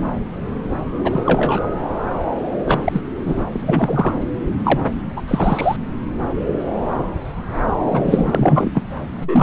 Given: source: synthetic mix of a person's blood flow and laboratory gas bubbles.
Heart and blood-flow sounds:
Doppler ultrasound of blood flow; subclavian vein
1.03-1.68 s: bubbles
2.66-3.01 s: bubbles
3.26-3.44 s: bubbles
3.51-4.12 s: bubbles
4.64-4.79 s: bubbles
5.16-5.22 s: bubbles
5.28-5.77 s: bubbles
7.92-8.71 s: bubbles
8.75-8.83 s: bubbles
9.21-9.42 s: bubbles
From the record:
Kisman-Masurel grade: 233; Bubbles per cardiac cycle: several, 3 to 8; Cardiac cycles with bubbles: 50 to 99%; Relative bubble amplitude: loud (0.450 to 0.775); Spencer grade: 3 (all of the cardiac periods contain showers or single bubble signals, but not dominating or overriding the cardiac motion signals); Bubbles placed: anywhere in the cardiac cycle

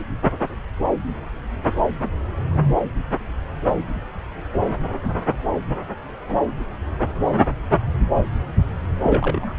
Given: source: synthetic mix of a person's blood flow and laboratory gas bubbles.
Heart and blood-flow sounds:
Doppler ultrasound of blood flow; subclavian vein
9.04-9.54 s: bubbles
From the record:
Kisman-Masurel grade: 212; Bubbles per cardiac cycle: several, 3 to 8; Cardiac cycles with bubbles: 1 to 10%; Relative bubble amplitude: moderate (0.250 to 0.450); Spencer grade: 1 (occasional bubble signal discernible with the cardiac motion signal, with majority of cardiac periods free of bubbles); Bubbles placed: anywhere in the cardiac cycle

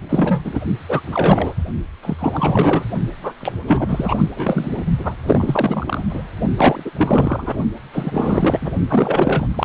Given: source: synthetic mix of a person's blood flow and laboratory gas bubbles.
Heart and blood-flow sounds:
Doppler ultrasound of blood flow; precordium
0.09-0.60 s: bubbles
0.89-1.01 s: bubbles
1.06-1.54 s: bubbles
2.02-2.16 s: bubbles
2.19-2.85 s: bubbles
3.22-3.34 s: bubbles
3.40-3.52 s: bubbles
3.66-4.83 s: bubbles
4.98-5.15 s: bubbles
5.25-6.04 s: bubbles
6.09-6.23 s: bubbles
6.57-6.91 s: bubbles
6.96-7.57 s: bubbles
7.93-8.59 s: bubbles
8.62-8.71 s: bubbles
8.89-9.47 s: bubbles
9.54-9.65 s: bubbles
From the record:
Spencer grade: 4 (maximum detectable bubble signal sounding continuously throughout systole and diastole of every cardiac period, and overriding the amplitude of the normal cardiac signals); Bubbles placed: only in the low amplitude regions of the cardiac cycle

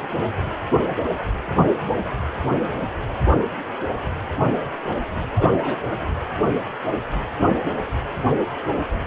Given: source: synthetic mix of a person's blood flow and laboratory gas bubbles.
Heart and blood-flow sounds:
Doppler ultrasound of blood flow; precordium
5.35-5.79 s: bubbles
From the record:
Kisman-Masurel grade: 122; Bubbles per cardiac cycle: 1 to 2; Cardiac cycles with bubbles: 10 to 50%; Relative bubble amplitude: moderate (0.250 to 0.450); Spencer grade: 2 (many but less than half of the cardiac periods contain bubble signals, singularly or in groups); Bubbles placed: anywhere in the cardiac cycle

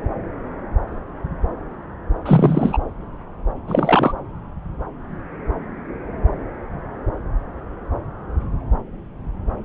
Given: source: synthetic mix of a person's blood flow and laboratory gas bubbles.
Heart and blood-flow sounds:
Doppler ultrasound of blood flow; subclavian vein
2.26-2.79 s: bubbles
3.68-4.12 s: bubbles
From the record:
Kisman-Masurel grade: 223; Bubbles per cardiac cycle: several, 3 to 8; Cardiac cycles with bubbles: 10 to 50%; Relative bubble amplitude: loud (0.450 to 0.775); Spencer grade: 2 (many but less than half of the cardiac periods contain bubble signals, singularly or in groups); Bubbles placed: anywhere in the cardiac cycle

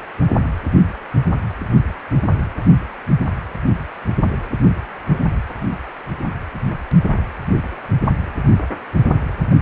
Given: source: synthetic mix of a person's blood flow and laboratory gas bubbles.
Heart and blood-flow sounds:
Doppler ultrasound of blood flow; precordium
no bubbles
From the record:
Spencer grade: 0 (complete lack of bubble signals)

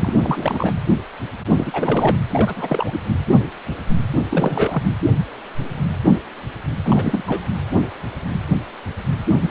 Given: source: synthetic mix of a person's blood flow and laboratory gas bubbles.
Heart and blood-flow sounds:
Doppler ultrasound of blood flow; precordium
0.01-0.72 s: bubbles
1.52-2.16 s: bubbles
2.31-2.99 s: bubbles
4.30-4.83 s: bubbles
6.84-7.23 s: bubbles
7.27-7.44 s: bubbles
9.43-9.51 s: bubbles
From the record:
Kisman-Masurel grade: 332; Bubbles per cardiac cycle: rolling drumbeat, 9 or more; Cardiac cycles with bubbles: 50 to 99%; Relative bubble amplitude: moderate (0.250 to 0.450); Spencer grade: 3 (all of the cardiac periods contain showers or single bubble signals, but not dominating or overriding the cardiac motion signals); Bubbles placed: anywhere in the cardiac cycle

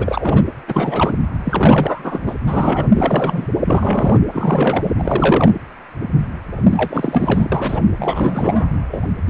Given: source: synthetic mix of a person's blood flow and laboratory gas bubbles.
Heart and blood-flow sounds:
Doppler ultrasound of blood flow; precordium
0.00-0.45 s: bubbles
0.68-1.14 s: bubbles
1.45-2.35 s: bubbles
2.48-2.88 s: bubbles
2.94-3.47 s: bubbles
3.65-4.19 s: bubbles
4.33-4.92 s: bubbles
4.97-5.53 s: bubbles
6.71-7.49 s: bubbles
7.51-7.85 s: bubbles
7.97-8.69 s: bubbles
8.92-9.02 s: bubbles
9.27-9.30 s: bubbles
From the record:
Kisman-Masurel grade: 333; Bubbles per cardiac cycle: rolling drumbeat, 9 or more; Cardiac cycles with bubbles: 50 to 99%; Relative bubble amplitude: loud (0.450 to 0.775); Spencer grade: 3 (all of the cardiac periods contain showers or single bubble signals, but not dominating or overriding the cardiac motion signals); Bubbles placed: anywhere in the cardiac cycle

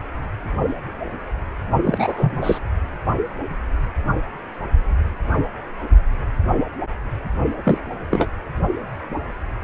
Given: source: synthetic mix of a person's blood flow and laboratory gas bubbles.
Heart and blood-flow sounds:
Doppler ultrasound of blood flow; precordium
1.83-2.59 s: bubbles
7.63-7.78 s: bubbles
8.11-8.27 s: bubbles
From the record:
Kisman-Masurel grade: 223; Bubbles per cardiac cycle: several, 3 to 8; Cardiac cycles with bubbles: 10 to 50%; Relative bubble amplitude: loud (0.450 to 0.775); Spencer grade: 2 (many but less than half of the cardiac periods contain bubble signals, singularly or in groups); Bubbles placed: only in the low amplitude regions of the cardiac cycle

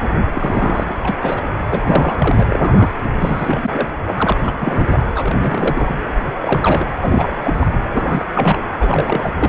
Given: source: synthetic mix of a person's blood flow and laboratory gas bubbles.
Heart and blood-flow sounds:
Doppler ultrasound of blood flow; precordium
0.34-0.95 s: bubbles
1.03-1.17 s: bubbles
1.22-1.42 s: bubbles
1.66-2.17 s: bubbles
2.19-2.90 s: bubbles
3.19-3.88 s: bubbles
4.07-4.38 s: bubbles
4.43-4.53 s: bubbles
4.60-5.05 s: bubbles
5.15-6.00 s: bubbles
6.42-6.87 s: bubbles
7.00-7.33 s: bubbles
7.43-7.54 s: bubbles
7.60-7.67 s: bubbles
7.71-7.78 s: bubbles
7.94-8.32 s: bubbles
8.35-8.59 s: bubbles
8.79-9.33 s: bubbles
9.37-9.48 s: bubbles
From the record:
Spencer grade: 3 (all of the cardiac periods contain showers or single bubble signals, but not dominating or overriding the cardiac motion signals); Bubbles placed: anywhere in the cardiac cycle

